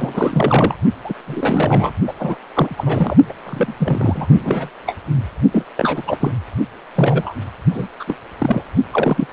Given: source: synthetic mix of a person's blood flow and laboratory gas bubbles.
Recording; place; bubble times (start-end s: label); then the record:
Doppler ultrasound of blood flow; precordium
0.00-0.75 s: bubbles
1.04-1.14 s: bubbles
1.27-1.92 s: bubbles
2.07-2.14 s: bubbles
2.19-2.37 s: bubbles
2.54-3.17 s: bubbles
3.29-3.34 s: bubbles
3.46-3.74 s: bubbles
3.77-4.26 s: bubbles
4.32-4.70 s: bubbles
4.86-4.96 s: bubbles
5.52-5.63 s: bubbles
5.76-6.03 s: bubbles
6.07-6.17 s: bubbles
6.20-6.31 s: bubbles
6.95-7.33 s: bubbles
7.74-7.88 s: bubbles
7.99-8.04 s: bubbles
8.07-8.15 s: bubbles
8.38-8.63 s: bubbles
8.93-9.27 s: bubbles
From the record:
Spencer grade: 3 (all of the cardiac periods contain showers or single bubble signals, but not dominating or overriding the cardiac motion signals); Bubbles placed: only in the low amplitude regions of the cardiac cycle